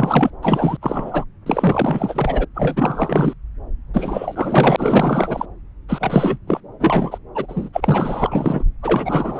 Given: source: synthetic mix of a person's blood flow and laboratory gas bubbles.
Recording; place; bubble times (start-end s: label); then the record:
Doppler ultrasound of blood flow; subclavian vein
0.00-0.31 s: bubbles
0.42-0.78 s: bubbles
0.81-1.25 s: bubbles
1.46-2.45 s: bubbles
2.54-3.33 s: bubbles
3.93-5.46 s: bubbles
5.88-6.38 s: bubbles
6.47-6.60 s: bubbles
6.80-7.18 s: bubbles
7.34-7.69 s: bubbles
7.73-8.63 s: bubbles
8.82-9.40 s: bubbles
From the record:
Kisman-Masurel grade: 444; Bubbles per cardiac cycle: continuous sound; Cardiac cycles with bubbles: 100%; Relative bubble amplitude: maximal (0.775 to 0.999); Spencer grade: 4 (maximum detectable bubble signal sounding continuously throughout systole and diastole of every cardiac period, and overriding the amplitude of the normal cardiac signals); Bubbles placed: anywhere in the cardiac cycle